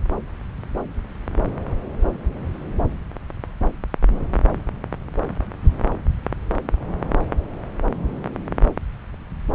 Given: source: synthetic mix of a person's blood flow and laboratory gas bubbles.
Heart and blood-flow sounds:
Doppler ultrasound of blood flow; subclavian vein
no bubbles
From the record:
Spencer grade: 0 (complete lack of bubble signals)

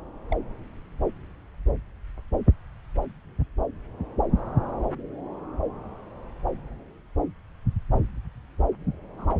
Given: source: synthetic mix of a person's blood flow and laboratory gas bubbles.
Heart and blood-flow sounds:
Doppler ultrasound of blood flow; subclavian vein
0.31-0.37 s: bubbles
9.18-9.35 s: bubbles
From the record:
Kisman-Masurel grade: 121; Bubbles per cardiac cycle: 1 to 2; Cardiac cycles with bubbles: 10 to 50%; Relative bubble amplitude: barely perceptible (0.100 to 0.250); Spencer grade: 2 (many but less than half of the cardiac periods contain bubble signals, singularly or in groups); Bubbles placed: anywhere in the cardiac cycle

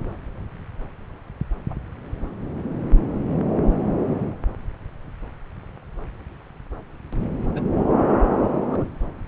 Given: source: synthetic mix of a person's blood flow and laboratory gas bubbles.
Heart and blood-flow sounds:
Doppler ultrasound of blood flow; subclavian vein
1.70-1.75 s: bubbles
7.54-7.62 s: bubbles
8.69-8.86 s: bubbles
From the record:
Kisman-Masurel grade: 121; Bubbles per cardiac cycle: 1 to 2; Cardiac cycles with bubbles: 10 to 50%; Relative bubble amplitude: barely perceptible (0.100 to 0.250); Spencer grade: 2 (many but less than half of the cardiac periods contain bubble signals, singularly or in groups); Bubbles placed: anywhere in the cardiac cycle

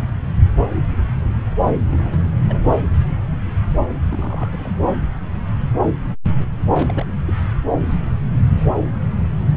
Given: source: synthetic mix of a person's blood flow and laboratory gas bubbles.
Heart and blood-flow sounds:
Doppler ultrasound of blood flow; subclavian vein
1.91-2.09 s: bubbles
2.12-2.27 s: bubbles
2.46-2.69 s: bubbles
4.09-4.74 s: bubbles
6.73-7.11 s: bubbles
7.25-7.33 s: bubbles
9.48-9.57 s: bubbles
From the record:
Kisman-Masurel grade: 221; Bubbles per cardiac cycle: several, 3 to 8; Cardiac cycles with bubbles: 10 to 50%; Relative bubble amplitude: barely perceptible (0.100 to 0.250); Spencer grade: 2 (many but less than half of the cardiac periods contain bubble signals, singularly or in groups); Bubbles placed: anywhere in the cardiac cycle

